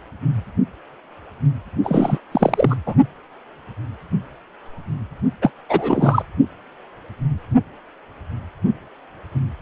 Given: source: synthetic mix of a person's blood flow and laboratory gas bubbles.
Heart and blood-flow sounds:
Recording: Doppler ultrasound of blood flow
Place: precordium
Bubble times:
1.83-2.19 s: bubbles
2.31-2.75 s: bubbles
2.86-2.95 s: bubbles
5.42-5.50 s: bubbles
5.69-6.23 s: bubbles
From the record:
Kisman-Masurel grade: 223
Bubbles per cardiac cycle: several, 3 to 8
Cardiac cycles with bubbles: 10 to 50%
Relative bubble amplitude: loud (0.450 to 0.775)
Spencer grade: 2 (many but less than half of the cardiac periods contain bubble signals, singularly or in groups)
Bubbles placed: only in the low amplitude regions of the cardiac cycle

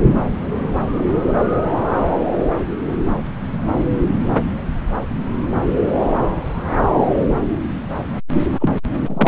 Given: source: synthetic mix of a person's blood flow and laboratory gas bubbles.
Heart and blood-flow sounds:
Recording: Doppler ultrasound of blood flow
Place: subclavian vein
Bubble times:
8.59-8.79 s: bubbles
9.06-9.28 s: bubbles
From the record:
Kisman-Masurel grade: 213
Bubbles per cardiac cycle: several, 3 to 8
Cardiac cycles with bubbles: 1 to 10%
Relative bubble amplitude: loud (0.450 to 0.775)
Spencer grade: 1 (occasional bubble signal discernible with the cardiac motion signal, with majority of cardiac periods free of bubbles)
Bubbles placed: anywhere in the cardiac cycle

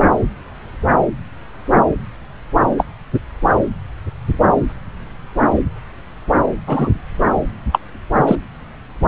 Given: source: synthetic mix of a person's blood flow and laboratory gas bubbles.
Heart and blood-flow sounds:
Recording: Doppler ultrasound of blood flow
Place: subclavian vein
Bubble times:
2.77-2.84 s: bubbles
6.67-6.89 s: bubbles
7.72-7.79 s: bubbles
8.27-8.36 s: bubbles
From the record:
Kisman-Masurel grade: 123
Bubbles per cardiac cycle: 1 to 2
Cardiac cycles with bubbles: 10 to 50%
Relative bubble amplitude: loud (0.450 to 0.775)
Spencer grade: 2 (many but less than half of the cardiac periods contain bubble signals, singularly or in groups)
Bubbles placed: anywhere in the cardiac cycle

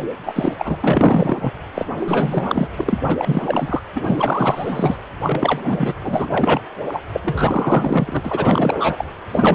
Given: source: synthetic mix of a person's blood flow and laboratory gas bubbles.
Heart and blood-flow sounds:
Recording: Doppler ultrasound of blood flow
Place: precordium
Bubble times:
0.26-0.53 s: bubbles
0.58-0.78 s: bubbles
0.82-1.51 s: bubbles
1.74-1.86 s: bubbles
2.00-2.68 s: bubbles
2.77-2.98 s: bubbles
3.09-3.83 s: bubbles
3.95-4.97 s: bubbles
5.22-5.94 s: bubbles
6.03-6.28 s: bubbles
6.31-6.60 s: bubbles
6.88-7.02 s: bubbles
7.12-7.21 s: bubbles
7.23-8.21 s: bubbles
8.23-9.05 s: bubbles
9.29-9.54 s: bubbles
From the record:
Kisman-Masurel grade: 444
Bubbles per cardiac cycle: continuous sound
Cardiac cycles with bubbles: 100%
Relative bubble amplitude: maximal (0.775 to 0.999)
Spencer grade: 4 (maximum detectable bubble signal sounding continuously throughout systole and diastole of every cardiac period, and overriding the amplitude of the normal cardiac signals)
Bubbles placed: anywhere in the cardiac cycle

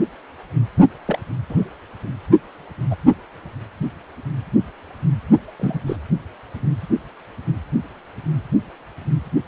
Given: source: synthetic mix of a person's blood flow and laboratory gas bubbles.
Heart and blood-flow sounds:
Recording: Doppler ultrasound of blood flow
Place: precordium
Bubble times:
1.07-1.19 s: bubbles
1.49-1.65 s: bubbles
2.90-2.96 s: bubbles
5.59-5.81 s: bubbles
5.87-5.96 s: bubbles
From the record:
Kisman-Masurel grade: 122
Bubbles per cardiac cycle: 1 to 2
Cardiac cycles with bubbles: 10 to 50%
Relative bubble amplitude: moderate (0.250 to 0.450)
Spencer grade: 2 (many but less than half of the cardiac periods contain bubble signals, singularly or in groups)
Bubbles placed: only in the low amplitude regions of the cardiac cycle

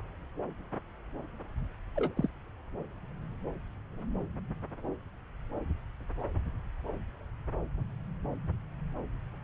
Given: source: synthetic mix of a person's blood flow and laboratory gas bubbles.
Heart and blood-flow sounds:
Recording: Doppler ultrasound of blood flow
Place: subclavian vein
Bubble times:
1.95-2.13 s: bubbles
2.17-2.29 s: bubbles
From the record:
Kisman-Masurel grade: 111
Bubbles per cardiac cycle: 1 to 2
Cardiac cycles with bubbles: 1 to 10%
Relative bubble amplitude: barely perceptible (0.100 to 0.250)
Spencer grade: 1 (occasional bubble signal discernible with the cardiac motion signal, with majority of cardiac periods free of bubbles)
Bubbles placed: anywhere in the cardiac cycle

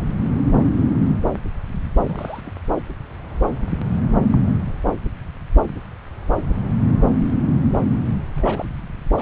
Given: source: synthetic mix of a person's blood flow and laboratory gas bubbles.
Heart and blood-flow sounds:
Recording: Doppler ultrasound of blood flow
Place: subclavian vein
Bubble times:
2.02-2.41 s: bubbles
2.44-2.52 s: bubbles
4.32-4.42 s: bubbles
4.86-4.93 s: bubbles
8.35-8.65 s: bubbles
9.14-9.22 s: bubbles
From the record:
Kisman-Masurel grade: 221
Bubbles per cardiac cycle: several, 3 to 8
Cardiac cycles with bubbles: 10 to 50%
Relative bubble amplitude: barely perceptible (0.100 to 0.250)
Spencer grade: 2 (many but less than half of the cardiac periods contain bubble signals, singularly or in groups)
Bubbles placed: anywhere in the cardiac cycle

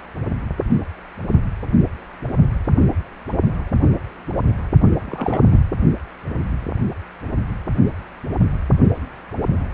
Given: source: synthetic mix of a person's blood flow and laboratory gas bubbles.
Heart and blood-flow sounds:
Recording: Doppler ultrasound of blood flow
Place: precordium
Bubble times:
5.06-5.45 s: bubbles
5.50-5.58 s: bubbles
From the record:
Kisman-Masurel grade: 212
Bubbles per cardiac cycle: several, 3 to 8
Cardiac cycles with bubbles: 1 to 10%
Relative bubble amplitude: moderate (0.250 to 0.450)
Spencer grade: 1 (occasional bubble signal discernible with the cardiac motion signal, with majority of cardiac periods free of bubbles)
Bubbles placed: only in the low amplitude regions of the cardiac cycle

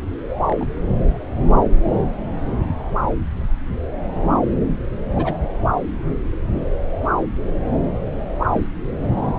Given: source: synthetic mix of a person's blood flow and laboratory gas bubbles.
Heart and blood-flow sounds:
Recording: Doppler ultrasound of blood flow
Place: subclavian vein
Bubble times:
0.36-0.67 s: bubbles
5.16-5.34 s: bubbles
8.53-8.67 s: bubbles
From the record:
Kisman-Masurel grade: 122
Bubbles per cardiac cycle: 1 to 2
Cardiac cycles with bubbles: 10 to 50%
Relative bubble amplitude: moderate (0.250 to 0.450)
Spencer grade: 2 (many but less than half of the cardiac periods contain bubble signals, singularly or in groups)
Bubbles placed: anywhere in the cardiac cycle

